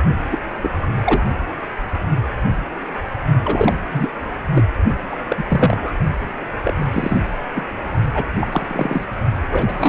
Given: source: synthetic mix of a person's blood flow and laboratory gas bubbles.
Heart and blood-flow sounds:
Doppler ultrasound of blood flow; precordium
0.31-0.38 s: bubbles
0.62-0.70 s: bubbles
0.82-0.87 s: bubbles
1.04-1.23 s: bubbles
3.42-3.85 s: bubbles
3.91-4.10 s: bubbles
4.54-4.64 s: bubbles
5.12-5.17 s: bubbles
5.28-5.44 s: bubbles
5.49-5.77 s: bubbles
5.82-5.93 s: bubbles
6.64-6.86 s: bubbles
6.91-7.20 s: bubbles
7.54-7.66 s: bubbles
8.15-8.25 s: bubbles
8.34-9.04 s: bubbles
9.50-9.89 s: bubbles
From the record:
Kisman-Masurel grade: 233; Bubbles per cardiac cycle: several, 3 to 8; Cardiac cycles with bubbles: 50 to 99%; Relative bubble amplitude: loud (0.450 to 0.775); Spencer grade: 3 (all of the cardiac periods contain showers or single bubble signals, but not dominating or overriding the cardiac motion signals); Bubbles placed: only in the low amplitude regions of the cardiac cycle

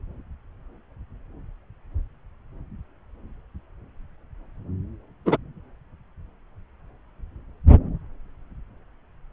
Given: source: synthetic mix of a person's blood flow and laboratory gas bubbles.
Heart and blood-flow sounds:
Doppler ultrasound of blood flow; subclavian vein
5.25-5.37 s: bubbles
From the record:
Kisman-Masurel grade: 112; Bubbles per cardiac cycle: 1 to 2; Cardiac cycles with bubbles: 1 to 10%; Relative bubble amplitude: moderate (0.250 to 0.450); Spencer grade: 1 (occasional bubble signal discernible with the cardiac motion signal, with majority of cardiac periods free of bubbles); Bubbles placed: anywhere in the cardiac cycle

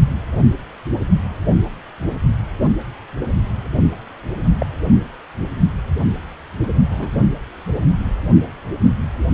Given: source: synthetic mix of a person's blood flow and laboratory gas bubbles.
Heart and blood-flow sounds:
Doppler ultrasound of blood flow; precordium
3.21-3.25 s: bubbles
4.58-4.66 s: bubbles
6.89-7.08 s: bubbles
From the record:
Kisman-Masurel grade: 122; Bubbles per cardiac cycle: 1 to 2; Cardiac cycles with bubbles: 10 to 50%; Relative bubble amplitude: moderate (0.250 to 0.450); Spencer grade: 2 (many but less than half of the cardiac periods contain bubble signals, singularly or in groups); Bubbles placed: only in the low amplitude regions of the cardiac cycle

